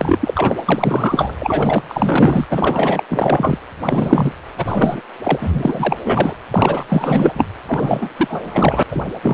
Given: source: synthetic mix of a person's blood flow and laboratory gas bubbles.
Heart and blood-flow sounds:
Doppler ultrasound of blood flow; precordium
0.00-0.56 s: bubbles
0.68-1.36 s: bubbles
1.39-1.82 s: bubbles
1.88-2.48 s: bubbles
2.50-3.04 s: bubbles
3.08-3.57 s: bubbles
3.85-4.32 s: bubbles
4.56-5.00 s: bubbles
5.23-5.96 s: bubbles
6.03-6.33 s: bubbles
6.52-7.46 s: bubbles
7.65-8.10 s: bubbles
8.17-8.83 s: bubbles
8.91-9.03 s: bubbles
9.22-9.34 s: bubbles
From the record:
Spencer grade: 4 (maximum detectable bubble signal sounding continuously throughout systole and diastole of every cardiac period, and overriding the amplitude of the normal cardiac signals); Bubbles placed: anywhere in the cardiac cycle

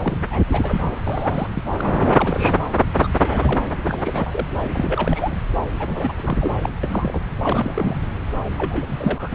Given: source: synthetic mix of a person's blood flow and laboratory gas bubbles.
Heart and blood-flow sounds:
Doppler ultrasound of blood flow; subclavian vein
0.04-0.24 s: bubbles
0.30-0.42 s: bubbles
0.48-0.99 s: bubbles
1.07-1.49 s: bubbles
1.55-1.63 s: bubbles
1.79-1.81 s: bubbles
1.92-2.58 s: bubbles
2.76-2.83 s: bubbles
2.97-3.08 s: bubbles
3.21-3.67 s: bubbles
3.83-4.46 s: bubbles
4.62-5.38 s: bubbles
5.79-6.12 s: bubbles
6.17-6.37 s: bubbles
6.40-6.54 s: bubbles
6.62-6.70 s: bubbles
6.83-7.21 s: bubbles
7.42-8.02 s: bubbles
8.57-8.86 s: bubbles
8.88-9.34 s: bubbles
From the record:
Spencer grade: 3 (all of the cardiac periods contain showers or single bubble signals, but not dominating or overriding the cardiac motion signals); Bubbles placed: anywhere in the cardiac cycle

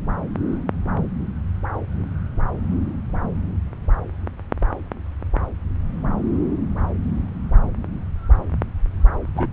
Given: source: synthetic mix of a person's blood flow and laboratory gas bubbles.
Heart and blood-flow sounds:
Doppler ultrasound of blood flow; subclavian vein
9.35-9.46 s: bubbles
From the record:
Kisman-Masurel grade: 212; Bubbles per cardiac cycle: several, 3 to 8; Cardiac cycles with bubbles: 1 to 10%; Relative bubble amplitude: moderate (0.250 to 0.450); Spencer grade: 1 (occasional bubble signal discernible with the cardiac motion signal, with majority of cardiac periods free of bubbles); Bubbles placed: anywhere in the cardiac cycle

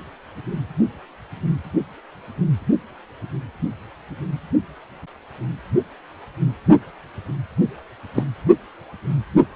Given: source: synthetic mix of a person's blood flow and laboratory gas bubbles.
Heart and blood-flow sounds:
Doppler ultrasound of blood flow; precordium
8.14-8.24 s: bubbles
From the record:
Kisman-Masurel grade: 112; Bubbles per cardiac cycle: 1 to 2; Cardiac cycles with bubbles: 1 to 10%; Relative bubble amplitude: moderate (0.250 to 0.450); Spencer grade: 1 (occasional bubble signal discernible with the cardiac motion signal, with majority of cardiac periods free of bubbles); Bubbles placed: anywhere in the cardiac cycle

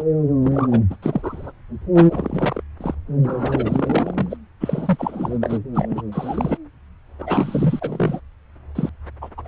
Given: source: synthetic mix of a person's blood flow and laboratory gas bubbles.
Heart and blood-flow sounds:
Doppler ultrasound of blood flow; subclavian vein
0.00-0.03 s: bubbles
0.42-0.81 s: bubbles
0.90-0.96 s: bubbles
1.02-1.52 s: bubbles
1.94-2.06 s: bubbles
2.08-2.63 s: bubbles
2.81-2.95 s: bubbles
3.23-4.37 s: bubbles
4.60-5.58 s: bubbles
5.74-6.03 s: bubbles
6.12-6.58 s: bubbles
7.18-8.20 s: bubbles
8.75-8.90 s: bubbles
9.21-9.29 s: bubbles
9.37-9.48 s: bubbles
From the record:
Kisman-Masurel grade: 343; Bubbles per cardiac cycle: rolling drumbeat, 9 or more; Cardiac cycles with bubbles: 100%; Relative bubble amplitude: loud (0.450 to 0.775); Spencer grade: 3 (all of the cardiac periods contain showers or single bubble signals, but not dominating or overriding the cardiac motion signals); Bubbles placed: anywhere in the cardiac cycle

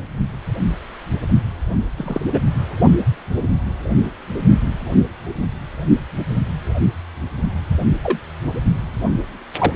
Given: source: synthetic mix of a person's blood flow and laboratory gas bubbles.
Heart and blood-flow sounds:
Doppler ultrasound of blood flow; precordium
1.97-2.21 s: bubbles
2.33-2.39 s: bubbles
8.03-8.19 s: bubbles
9.58-9.73 s: bubbles
From the record:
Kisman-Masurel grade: 122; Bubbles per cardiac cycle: 1 to 2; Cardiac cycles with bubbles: 10 to 50%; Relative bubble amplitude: moderate (0.250 to 0.450); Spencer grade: 2 (many but less than half of the cardiac periods contain bubble signals, singularly or in groups); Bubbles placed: only in the low amplitude regions of the cardiac cycle

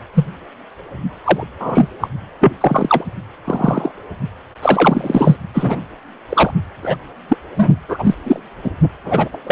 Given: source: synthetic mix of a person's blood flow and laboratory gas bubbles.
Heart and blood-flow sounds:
Doppler ultrasound of blood flow; precordium
0.14-0.25 s: bubbles
1.24-1.43 s: bubbles
1.57-1.89 s: bubbles
2.01-2.08 s: bubbles
2.40-2.52 s: bubbles
2.60-3.04 s: bubbles
3.45-3.92 s: bubbles
4.62-5.37 s: bubbles
5.54-5.81 s: bubbles
6.29-6.50 s: bubbles
6.82-6.96 s: bubbles
7.29-7.37 s: bubbles
7.56-7.75 s: bubbles
7.88-8.14 s: bubbles
8.25-8.40 s: bubbles
8.62-8.71 s: bubbles
9.04-9.29 s: bubbles
9.32-9.37 s: bubbles
9.46-9.52 s: bubbles
From the record:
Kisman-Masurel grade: 243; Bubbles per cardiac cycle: several, 3 to 8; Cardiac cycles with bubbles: 100%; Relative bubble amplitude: loud (0.450 to 0.775); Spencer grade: 3 (all of the cardiac periods contain showers or single bubble signals, but not dominating or overriding the cardiac motion signals); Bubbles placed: anywhere in the cardiac cycle

